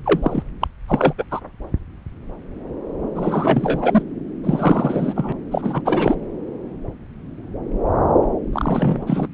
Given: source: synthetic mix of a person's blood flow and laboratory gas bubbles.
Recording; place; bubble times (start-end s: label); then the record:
Doppler ultrasound of blood flow; subclavian vein
0.05-0.43 s: bubbles
0.61-0.67 s: bubbles
0.87-1.13 s: bubbles
1.18-1.24 s: bubbles
1.31-1.40 s: bubbles
3.16-4.03 s: bubbles
4.44-5.33 s: bubbles
5.51-5.82 s: bubbles
5.85-6.16 s: bubbles
8.52-9.27 s: bubbles
From the record:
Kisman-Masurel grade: 332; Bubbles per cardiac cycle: rolling drumbeat, 9 or more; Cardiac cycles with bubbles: 50 to 99%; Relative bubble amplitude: moderate (0.250 to 0.450); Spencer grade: 3 (all of the cardiac periods contain showers or single bubble signals, but not dominating or overriding the cardiac motion signals); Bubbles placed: anywhere in the cardiac cycle